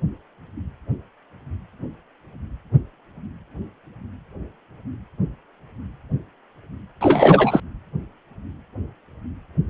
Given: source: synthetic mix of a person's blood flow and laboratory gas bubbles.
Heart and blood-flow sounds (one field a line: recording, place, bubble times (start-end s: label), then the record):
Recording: Doppler ultrasound of blood flow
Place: precordium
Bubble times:
7.01-7.60 s: bubbles
From the record:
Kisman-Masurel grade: 213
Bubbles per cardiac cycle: several, 3 to 8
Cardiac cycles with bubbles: 1 to 10%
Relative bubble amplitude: loud (0.450 to 0.775)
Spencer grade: 1 (occasional bubble signal discernible with the cardiac motion signal, with majority of cardiac periods free of bubbles)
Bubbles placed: anywhere in the cardiac cycle